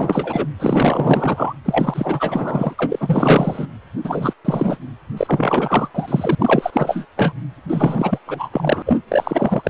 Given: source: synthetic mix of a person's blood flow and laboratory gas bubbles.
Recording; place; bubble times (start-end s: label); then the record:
Doppler ultrasound of blood flow; precordium
0.00-0.47 s: bubbles
0.59-1.53 s: bubbles
1.65-2.75 s: bubbles
2.78-3.67 s: bubbles
4.04-4.34 s: bubbles
4.45-4.78 s: bubbles
5.17-5.88 s: bubbles
5.95-6.35 s: bubbles
6.38-7.06 s: bubbles
7.16-7.33 s: bubbles
7.69-8.19 s: bubbles
8.27-8.49 s: bubbles
8.52-8.83 s: bubbles
8.85-9.00 s: bubbles
9.08-9.70 s: bubbles
From the record:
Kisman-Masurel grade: 444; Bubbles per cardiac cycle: continuous sound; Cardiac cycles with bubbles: 100%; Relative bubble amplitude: maximal (0.775 to 0.999); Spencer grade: 4 (maximum detectable bubble signal sounding continuously throughout systole and diastole of every cardiac period, and overriding the amplitude of the normal cardiac signals); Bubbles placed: anywhere in the cardiac cycle